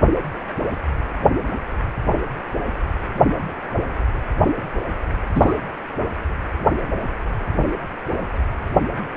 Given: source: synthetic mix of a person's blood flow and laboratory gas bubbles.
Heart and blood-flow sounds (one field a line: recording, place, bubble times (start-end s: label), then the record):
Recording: Doppler ultrasound of blood flow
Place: precordium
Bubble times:
5.34-5.53 s: bubbles
From the record:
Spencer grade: 2 (many but less than half of the cardiac periods contain bubble signals, singularly or in groups)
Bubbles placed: anywhere in the cardiac cycle